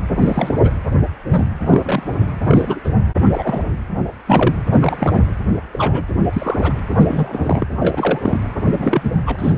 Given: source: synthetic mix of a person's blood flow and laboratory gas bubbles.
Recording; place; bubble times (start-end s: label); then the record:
Doppler ultrasound of blood flow; precordium
0.22-0.57 s: bubbles
0.64-0.70 s: bubbles
1.29-1.46 s: bubbles
1.59-2.33 s: bubbles
2.45-2.80 s: bubbles
2.84-2.90 s: bubbles
3.33-3.62 s: bubbles
4.26-4.54 s: bubbles
4.71-5.24 s: bubbles
5.72-6.04 s: bubbles
6.33-6.73 s: bubbles
6.96-7.66 s: bubbles
7.79-8.38 s: bubbles
8.65-9.11 s: bubbles
9.26-9.36 s: bubbles
9.38-9.56 s: bubbles
From the record:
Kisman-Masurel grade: 242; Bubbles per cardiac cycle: several, 3 to 8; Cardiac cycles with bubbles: 100%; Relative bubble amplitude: moderate (0.250 to 0.450); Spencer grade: 3 (all of the cardiac periods contain showers or single bubble signals, but not dominating or overriding the cardiac motion signals); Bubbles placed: anywhere in the cardiac cycle